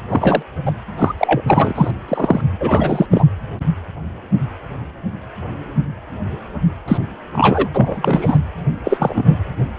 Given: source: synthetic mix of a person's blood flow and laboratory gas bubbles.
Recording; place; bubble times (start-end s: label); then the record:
Doppler ultrasound of blood flow; precordium
0.09-0.43 s: bubbles
0.65-0.73 s: bubbles
0.97-1.14 s: bubbles
1.18-1.42 s: bubbles
1.47-1.72 s: bubbles
1.75-1.91 s: bubbles
2.08-2.41 s: bubbles
2.60-3.06 s: bubbles
3.11-3.25 s: bubbles
6.88-6.97 s: bubbles
7.32-7.68 s: bubbles
7.75-8.38 s: bubbles
8.84-9.37 s: bubbles
From the record:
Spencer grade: 3 (all of the cardiac periods contain showers or single bubble signals, but not dominating or overriding the cardiac motion signals); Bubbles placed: anywhere in the cardiac cycle